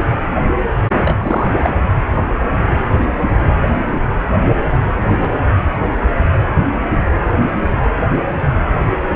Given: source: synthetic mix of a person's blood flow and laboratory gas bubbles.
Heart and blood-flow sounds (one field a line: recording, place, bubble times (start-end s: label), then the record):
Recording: Doppler ultrasound of blood flow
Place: precordium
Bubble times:
1.03-1.52 s: bubbles
1.64-1.70 s: bubbles
5.06-5.31 s: bubbles
From the record:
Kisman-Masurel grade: 212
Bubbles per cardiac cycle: several, 3 to 8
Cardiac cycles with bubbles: 1 to 10%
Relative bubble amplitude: moderate (0.250 to 0.450)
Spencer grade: 1 (occasional bubble signal discernible with the cardiac motion signal, with majority of cardiac periods free of bubbles)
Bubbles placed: anywhere in the cardiac cycle